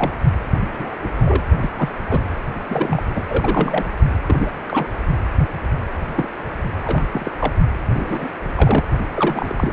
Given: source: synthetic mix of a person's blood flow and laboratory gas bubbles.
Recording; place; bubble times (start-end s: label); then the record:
Doppler ultrasound of blood flow; precordium
0.00-0.12 s: bubbles
0.78-0.94 s: bubbles
1.01-1.44 s: bubbles
1.61-1.70 s: bubbles
1.77-1.89 s: bubbles
2.08-2.22 s: bubbles
2.70-3.02 s: bubbles
3.13-3.25 s: bubbles
3.29-3.85 s: bubbles
4.27-4.51 s: bubbles
4.68-4.87 s: bubbles
6.15-6.28 s: bubbles
6.83-7.04 s: bubbles
7.14-7.31 s: bubbles
7.39-7.53 s: bubbles
7.93-8.29 s: bubbles
8.55-8.83 s: bubbles
9.14-9.71 s: bubbles
From the record:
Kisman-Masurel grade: 242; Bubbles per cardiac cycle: several, 3 to 8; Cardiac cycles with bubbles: 100%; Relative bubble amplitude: moderate (0.250 to 0.450); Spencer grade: 3 (all of the cardiac periods contain showers or single bubble signals, but not dominating or overriding the cardiac motion signals); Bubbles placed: anywhere in the cardiac cycle